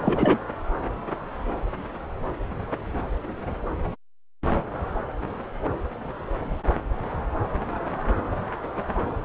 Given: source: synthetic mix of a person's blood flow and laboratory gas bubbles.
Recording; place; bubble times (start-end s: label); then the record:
Doppler ultrasound of blood flow; subclavian vein
0.02-0.39 s: bubbles
From the record:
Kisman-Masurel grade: 212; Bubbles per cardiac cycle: several, 3 to 8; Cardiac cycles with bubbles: 1 to 10%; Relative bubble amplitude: moderate (0.250 to 0.450); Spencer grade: 1 (occasional bubble signal discernible with the cardiac motion signal, with majority of cardiac periods free of bubbles); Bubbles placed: anywhere in the cardiac cycle